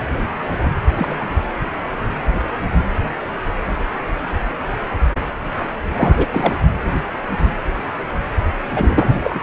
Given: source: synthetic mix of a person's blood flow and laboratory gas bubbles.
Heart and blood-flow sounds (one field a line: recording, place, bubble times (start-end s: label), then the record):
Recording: Doppler ultrasound of blood flow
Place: precordium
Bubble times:
0.96-1.25 s: bubbles
5.96-6.26 s: bubbles
6.32-6.57 s: bubbles
8.75-9.13 s: bubbles
9.23-9.43 s: bubbles
From the record:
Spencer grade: 2 (many but less than half of the cardiac periods contain bubble signals, singularly or in groups)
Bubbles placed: anywhere in the cardiac cycle